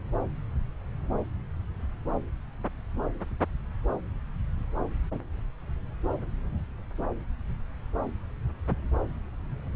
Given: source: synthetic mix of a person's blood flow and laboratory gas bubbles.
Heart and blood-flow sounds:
Doppler ultrasound of blood flow; subclavian vein
no bubbles
From the record:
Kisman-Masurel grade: 000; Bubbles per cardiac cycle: 0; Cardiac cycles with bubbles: 0%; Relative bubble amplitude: no bubbles discernible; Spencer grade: 0 (complete lack of bubble signals)

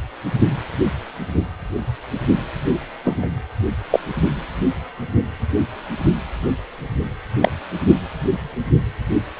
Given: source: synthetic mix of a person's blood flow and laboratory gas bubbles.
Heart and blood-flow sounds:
Doppler ultrasound of blood flow; precordium
3.04-3.29 s: bubbles
3.90-4.00 s: bubbles
7.41-7.51 s: bubbles
From the record:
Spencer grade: 2 (many but less than half of the cardiac periods contain bubble signals, singularly or in groups); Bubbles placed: anywhere in the cardiac cycle

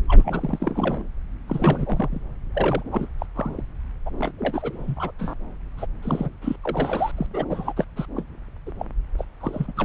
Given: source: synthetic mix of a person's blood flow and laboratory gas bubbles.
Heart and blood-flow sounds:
Doppler ultrasound of blood flow; subclavian vein
0.08-1.07 s: bubbles
1.47-2.21 s: bubbles
2.54-2.83 s: bubbles
2.92-3.09 s: bubbles
3.19-3.26 s: bubbles
3.35-3.61 s: bubbles
4.05-4.10 s: bubbles
4.18-4.31 s: bubbles
4.38-5.11 s: bubbles
5.18-5.34 s: bubbles
5.77-5.86 s: bubbles
6.02-6.29 s: bubbles
6.42-6.56 s: bubbles
6.63-7.11 s: bubbles
7.17-7.26 s: bubbles
7.33-7.46 s: bubbles
7.49-7.73 s: bubbles
7.76-7.84 s: bubbles
7.96-8.05 s: bubbles
8.15-8.24 s: bubbles
8.66-8.71 s: bubbles
8.79-8.86 s: bubbles
9.18-9.24 s: bubbles
9.40-9.72 s: bubbles
9.77-9.85 s: bubbles
From the record:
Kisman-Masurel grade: 342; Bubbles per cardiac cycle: rolling drumbeat, 9 or more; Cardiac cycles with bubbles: 100%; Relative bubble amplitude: moderate (0.250 to 0.450); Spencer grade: 3 (all of the cardiac periods contain showers or single bubble signals, but not dominating or overriding the cardiac motion signals); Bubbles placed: anywhere in the cardiac cycle

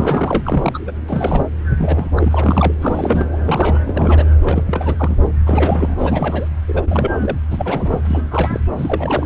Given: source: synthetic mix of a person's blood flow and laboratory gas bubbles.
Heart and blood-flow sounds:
Doppler ultrasound of blood flow; subclavian vein
0.00-0.92 s: bubbles
1.07-1.45 s: bubbles
1.78-2.74 s: bubbles
2.81-3.26 s: bubbles
3.32-3.38 s: bubbles
3.46-3.79 s: bubbles
3.85-4.25 s: bubbles
4.45-4.63 s: bubbles
4.66-4.96 s: bubbles
4.99-5.17 s: bubbles
5.46-5.96 s: bubbles
5.99-6.49 s: bubbles
6.68-7.36 s: bubbles
7.50-8.01 s: bubbles
8.04-8.22 s: bubbles
8.30-8.61 s: bubbles
8.77-9.26 s: bubbles
From the record:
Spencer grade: 3 (all of the cardiac periods contain showers or single bubble signals, but not dominating or overriding the cardiac motion signals); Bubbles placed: anywhere in the cardiac cycle

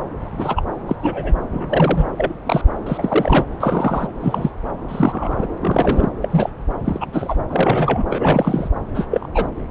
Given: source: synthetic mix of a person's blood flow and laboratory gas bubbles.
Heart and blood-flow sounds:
Doppler ultrasound of blood flow; subclavian vein
0.21-0.62 s: bubbles
0.87-0.96 s: bubbles
1.02-1.34 s: bubbles
1.51-2.06 s: bubbles
2.17-2.34 s: bubbles
2.46-2.62 s: bubbles
2.86-3.45 s: bubbles
3.60-4.07 s: bubbles
4.20-4.50 s: bubbles
4.88-5.46 s: bubbles
5.60-6.10 s: bubbles
6.21-6.50 s: bubbles
6.84-7.06 s: bubbles
7.12-7.34 s: bubbles
7.50-8.03 s: bubbles
8.09-8.69 s: bubbles
8.95-9.07 s: bubbles
9.10-9.28 s: bubbles
9.34-9.47 s: bubbles
From the record:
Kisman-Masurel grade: 242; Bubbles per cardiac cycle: several, 3 to 8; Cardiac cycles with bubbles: 100%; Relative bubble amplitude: moderate (0.250 to 0.450); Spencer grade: 3 (all of the cardiac periods contain showers or single bubble signals, but not dominating or overriding the cardiac motion signals); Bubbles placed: anywhere in the cardiac cycle

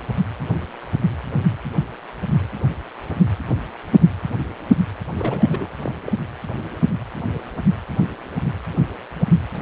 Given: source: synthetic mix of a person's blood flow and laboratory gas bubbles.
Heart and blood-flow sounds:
Doppler ultrasound of blood flow; precordium
5.17-5.69 s: bubbles
5.82-5.92 s: bubbles
6.04-6.12 s: bubbles
From the record:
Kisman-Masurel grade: 211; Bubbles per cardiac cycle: several, 3 to 8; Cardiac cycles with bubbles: 1 to 10%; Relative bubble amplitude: barely perceptible (0.100 to 0.250); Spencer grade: 1 (occasional bubble signal discernible with the cardiac motion signal, with majority of cardiac periods free of bubbles); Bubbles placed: anywhere in the cardiac cycle

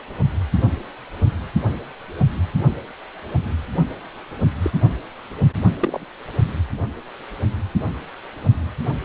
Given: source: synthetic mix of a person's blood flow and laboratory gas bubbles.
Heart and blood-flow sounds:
Doppler ultrasound of blood flow; precordium
4.62-4.71 s: bubbles
5.80-6.05 s: bubbles
From the record:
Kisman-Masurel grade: 122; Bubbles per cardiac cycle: 1 to 2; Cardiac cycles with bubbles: 10 to 50%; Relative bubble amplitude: moderate (0.250 to 0.450); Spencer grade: 2 (many but less than half of the cardiac periods contain bubble signals, singularly or in groups); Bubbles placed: only in the low amplitude regions of the cardiac cycle

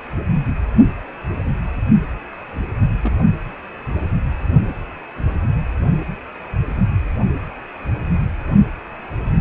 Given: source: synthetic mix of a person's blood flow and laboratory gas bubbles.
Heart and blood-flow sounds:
Doppler ultrasound of blood flow; precordium
3.02-3.27 s: bubbles
From the record:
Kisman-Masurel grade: 111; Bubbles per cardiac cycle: 1 to 2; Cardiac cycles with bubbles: 1 to 10%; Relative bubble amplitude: barely perceptible (0.100 to 0.250); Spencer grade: 1 (occasional bubble signal discernible with the cardiac motion signal, with majority of cardiac periods free of bubbles); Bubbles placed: only in the low amplitude regions of the cardiac cycle

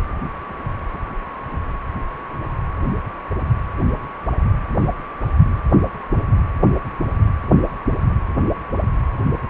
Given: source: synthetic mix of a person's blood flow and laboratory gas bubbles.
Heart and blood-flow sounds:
Doppler ultrasound of blood flow; precordium
no bubbles
From the record:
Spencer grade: 0 (complete lack of bubble signals)

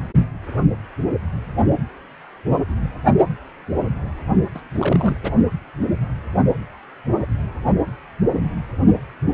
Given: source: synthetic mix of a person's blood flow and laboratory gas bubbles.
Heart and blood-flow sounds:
Doppler ultrasound of blood flow; precordium
4.54-4.61 s: bubbles
4.73-5.17 s: bubbles
5.23-5.31 s: bubbles
From the record:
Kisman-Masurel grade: 212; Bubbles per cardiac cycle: several, 3 to 8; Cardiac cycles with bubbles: 1 to 10%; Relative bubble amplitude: moderate (0.250 to 0.450); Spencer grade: 1 (occasional bubble signal discernible with the cardiac motion signal, with majority of cardiac periods free of bubbles); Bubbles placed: only in the low amplitude regions of the cardiac cycle

